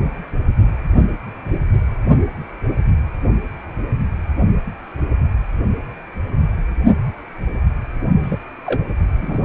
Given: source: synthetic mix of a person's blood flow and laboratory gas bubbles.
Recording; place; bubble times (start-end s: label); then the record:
Doppler ultrasound of blood flow; precordium
8.23-8.38 s: bubbles
8.66-8.83 s: bubbles
9.21-9.39 s: bubbles
From the record:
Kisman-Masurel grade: 212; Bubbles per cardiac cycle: several, 3 to 8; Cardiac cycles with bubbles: 1 to 10%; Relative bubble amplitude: moderate (0.250 to 0.450); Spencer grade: 1 (occasional bubble signal discernible with the cardiac motion signal, with majority of cardiac periods free of bubbles); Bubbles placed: only in the low amplitude regions of the cardiac cycle